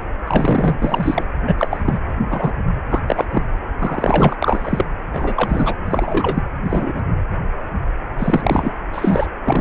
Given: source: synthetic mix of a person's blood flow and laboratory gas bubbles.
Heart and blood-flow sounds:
Doppler ultrasound of blood flow; precordium
0.00-0.03 s: bubbles
0.26-0.77 s: bubbles
0.82-1.25 s: bubbles
1.47-1.99 s: bubbles
2.30-2.52 s: bubbles
2.89-3.00 s: bubbles
3.07-3.25 s: bubbles
3.31-3.43 s: bubbles
3.78-4.36 s: bubbles
4.42-4.86 s: bubbles
5.13-5.79 s: bubbles
5.85-6.43 s: bubbles
6.63-7.00 s: bubbles
8.18-8.73 s: bubbles
8.92-9.27 s: bubbles
9.42-9.61 s: bubbles
From the record:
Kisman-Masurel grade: 233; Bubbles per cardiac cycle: several, 3 to 8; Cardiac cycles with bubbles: 50 to 99%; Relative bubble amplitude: loud (0.450 to 0.775); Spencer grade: 3 (all of the cardiac periods contain showers or single bubble signals, but not dominating or overriding the cardiac motion signals); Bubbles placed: anywhere in the cardiac cycle

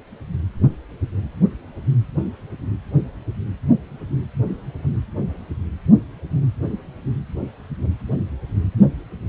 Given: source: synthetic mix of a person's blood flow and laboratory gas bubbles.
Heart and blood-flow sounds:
Doppler ultrasound of blood flow; precordium
no bubbles
From the record:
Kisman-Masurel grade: 000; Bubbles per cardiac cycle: 0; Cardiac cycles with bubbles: 0%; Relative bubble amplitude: no bubbles discernible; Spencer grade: 0 (complete lack of bubble signals)

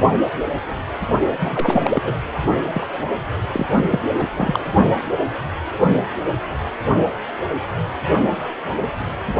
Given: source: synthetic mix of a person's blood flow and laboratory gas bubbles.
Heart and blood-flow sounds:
Doppler ultrasound of blood flow; precordium
1.40-2.02 s: bubbles
2.04-2.14 s: bubbles
2.73-2.87 s: bubbles
3.52-3.66 s: bubbles
3.90-4.00 s: bubbles
4.19-4.25 s: bubbles
4.35-4.59 s: bubbles
From the record:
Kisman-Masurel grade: 232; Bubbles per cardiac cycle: several, 3 to 8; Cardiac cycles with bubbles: 50 to 99%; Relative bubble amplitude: moderate (0.250 to 0.450); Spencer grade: 3 (all of the cardiac periods contain showers or single bubble signals, but not dominating or overriding the cardiac motion signals); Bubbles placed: only in the low amplitude regions of the cardiac cycle

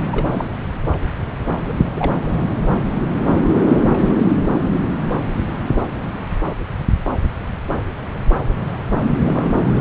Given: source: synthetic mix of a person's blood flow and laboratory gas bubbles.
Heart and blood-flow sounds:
Doppler ultrasound of blood flow; subclavian vein
0.11-0.26 s: bubbles
0.30-0.52 s: bubbles
1.68-1.73 s: bubbles
1.95-2.12 s: bubbles
3.68-4.13 s: bubbles
4.15-4.35 s: bubbles
9.20-9.64 s: bubbles
From the record:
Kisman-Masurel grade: 222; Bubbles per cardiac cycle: several, 3 to 8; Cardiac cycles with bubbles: 10 to 50%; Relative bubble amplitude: moderate (0.250 to 0.450); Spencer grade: 2 (many but less than half of the cardiac periods contain bubble signals, singularly or in groups); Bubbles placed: anywhere in the cardiac cycle

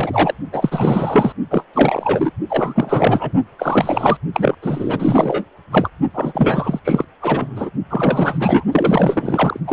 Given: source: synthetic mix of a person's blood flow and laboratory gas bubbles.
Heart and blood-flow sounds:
Doppler ultrasound of blood flow; precordium
0.00-0.34 s: bubbles
0.52-1.32 s: bubbles
1.51-1.65 s: bubbles
1.73-2.31 s: bubbles
2.48-3.32 s: bubbles
3.58-4.17 s: bubbles
4.33-4.55 s: bubbles
4.62-5.45 s: bubbles
5.71-5.88 s: bubbles
6.13-6.79 s: bubbles
6.84-7.05 s: bubbles
7.21-7.70 s: bubbles
7.90-8.65 s: bubbles
8.71-9.60 s: bubbles
9.67-9.73 s: bubbles
From the record:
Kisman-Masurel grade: 444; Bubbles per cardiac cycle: continuous sound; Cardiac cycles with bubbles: 100%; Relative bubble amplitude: maximal (0.775 to 0.999); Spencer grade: 4 (maximum detectable bubble signal sounding continuously throughout systole and diastole of every cardiac period, and overriding the amplitude of the normal cardiac signals); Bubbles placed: only in the low amplitude regions of the cardiac cycle

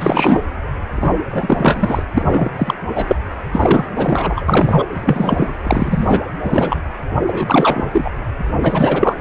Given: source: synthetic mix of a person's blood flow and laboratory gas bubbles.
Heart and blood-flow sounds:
Doppler ultrasound of blood flow; precordium
0.00-0.44 s: bubbles
0.96-1.11 s: bubbles
1.30-2.03 s: bubbles
2.13-2.51 s: bubbles
2.56-2.74 s: bubbles
2.94-3.16 s: bubbles
3.52-3.89 s: bubbles
3.95-4.46 s: bubbles
4.48-4.87 s: bubbles
4.92-5.54 s: bubbles
5.63-6.21 s: bubbles
6.45-6.83 s: bubbles
7.21-8.10 s: bubbles
8.62-9.21 s: bubbles
From the record:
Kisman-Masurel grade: 343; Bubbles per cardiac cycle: rolling drumbeat, 9 or more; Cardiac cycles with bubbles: 100%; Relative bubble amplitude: loud (0.450 to 0.775); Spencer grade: 3 (all of the cardiac periods contain showers or single bubble signals, but not dominating or overriding the cardiac motion signals); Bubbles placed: anywhere in the cardiac cycle

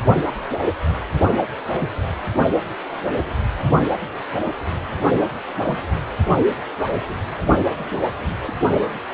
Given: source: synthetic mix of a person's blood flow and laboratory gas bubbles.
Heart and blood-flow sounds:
Doppler ultrasound of blood flow; precordium
1.69-1.88 s: bubbles
5.66-5.75 s: bubbles
7.64-7.72 s: bubbles
8.47-8.53 s: bubbles
From the record:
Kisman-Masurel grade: 121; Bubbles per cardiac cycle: 1 to 2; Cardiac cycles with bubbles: 10 to 50%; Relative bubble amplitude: barely perceptible (0.100 to 0.250); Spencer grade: 2 (many but less than half of the cardiac periods contain bubble signals, singularly or in groups); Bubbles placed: only in the low amplitude regions of the cardiac cycle

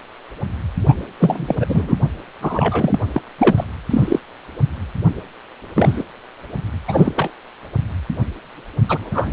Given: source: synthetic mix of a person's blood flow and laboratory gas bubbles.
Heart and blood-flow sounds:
Doppler ultrasound of blood flow; precordium
0.88-0.95 s: bubbles
1.19-1.56 s: bubbles
1.60-1.66 s: bubbles
1.69-1.96 s: bubbles
2.42-2.99 s: bubbles
3.12-3.22 s: bubbles
3.38-3.65 s: bubbles
3.90-4.19 s: bubbles
5.75-6.02 s: bubbles
6.88-7.13 s: bubbles
7.16-7.31 s: bubbles
8.88-9.33 s: bubbles
From the record:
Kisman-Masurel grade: 333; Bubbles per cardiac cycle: rolling drumbeat, 9 or more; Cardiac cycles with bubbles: 50 to 99%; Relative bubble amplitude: loud (0.450 to 0.775); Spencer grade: 3 (all of the cardiac periods contain showers or single bubble signals, but not dominating or overriding the cardiac motion signals); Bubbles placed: anywhere in the cardiac cycle

